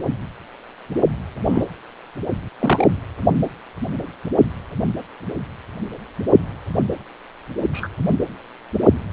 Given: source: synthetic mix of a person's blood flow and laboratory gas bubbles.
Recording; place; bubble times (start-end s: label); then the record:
Doppler ultrasound of blood flow; precordium
1.48-1.64 s: bubbles
2.60-2.88 s: bubbles
7.73-7.89 s: bubbles
From the record:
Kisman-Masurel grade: 123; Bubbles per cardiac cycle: 1 to 2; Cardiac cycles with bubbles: 10 to 50%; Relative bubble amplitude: loud (0.450 to 0.775); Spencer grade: 2 (many but less than half of the cardiac periods contain bubble signals, singularly or in groups); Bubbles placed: anywhere in the cardiac cycle